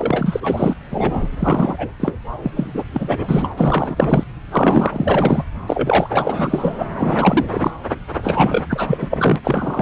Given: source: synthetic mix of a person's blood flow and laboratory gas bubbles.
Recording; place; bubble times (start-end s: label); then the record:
Doppler ultrasound of blood flow; subclavian vein
0.00-0.74 s: bubbles
0.90-1.28 s: bubbles
1.37-1.94 s: bubbles
2.00-2.18 s: bubbles
2.42-2.52 s: bubbles
2.56-2.84 s: bubbles
2.93-3.52 s: bubbles
3.56-4.24 s: bubbles
4.51-5.45 s: bubbles
5.66-6.83 s: bubbles
6.94-7.71 s: bubbles
8.22-8.65 s: bubbles
8.69-9.36 s: bubbles
9.44-9.82 s: bubbles
From the record:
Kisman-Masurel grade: 444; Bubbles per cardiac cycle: continuous sound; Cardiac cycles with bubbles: 100%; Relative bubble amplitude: maximal (0.775 to 0.999); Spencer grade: 4 (maximum detectable bubble signal sounding continuously throughout systole and diastole of every cardiac period, and overriding the amplitude of the normal cardiac signals); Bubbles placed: anywhere in the cardiac cycle